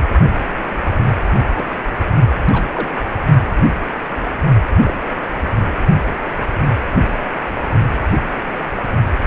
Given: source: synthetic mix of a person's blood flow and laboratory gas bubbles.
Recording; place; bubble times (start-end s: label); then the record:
Doppler ultrasound of blood flow; precordium
1.56-1.65 s: bubbles
2.48-2.66 s: bubbles
2.75-2.90 s: bubbles
4.85-4.93 s: bubbles
8.76-8.83 s: bubbles
From the record:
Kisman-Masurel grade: 121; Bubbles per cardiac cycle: 1 to 2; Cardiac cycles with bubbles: 10 to 50%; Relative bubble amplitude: barely perceptible (0.100 to 0.250); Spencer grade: 2 (many but less than half of the cardiac periods contain bubble signals, singularly or in groups); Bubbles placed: only in the low amplitude regions of the cardiac cycle